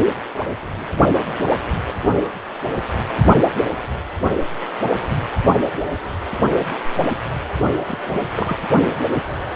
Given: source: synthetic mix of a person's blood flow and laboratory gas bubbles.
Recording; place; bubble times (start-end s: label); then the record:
Doppler ultrasound of blood flow; precordium
7.88-7.96 s: bubbles
8.06-8.21 s: bubbles
8.35-8.56 s: bubbles
From the record:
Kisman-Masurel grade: 211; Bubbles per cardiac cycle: several, 3 to 8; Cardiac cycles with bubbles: 1 to 10%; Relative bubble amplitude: barely perceptible (0.100 to 0.250); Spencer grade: 1 (occasional bubble signal discernible with the cardiac motion signal, with majority of cardiac periods free of bubbles); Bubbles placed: only in the low amplitude regions of the cardiac cycle